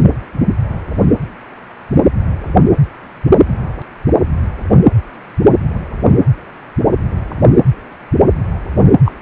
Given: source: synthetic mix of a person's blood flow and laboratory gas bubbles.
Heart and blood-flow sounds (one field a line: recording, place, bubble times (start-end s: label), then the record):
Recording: Doppler ultrasound of blood flow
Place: precordium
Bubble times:
9.05-9.12 s: bubbles
From the record:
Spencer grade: 1 (occasional bubble signal discernible with the cardiac motion signal, with majority of cardiac periods free of bubbles)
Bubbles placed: anywhere in the cardiac cycle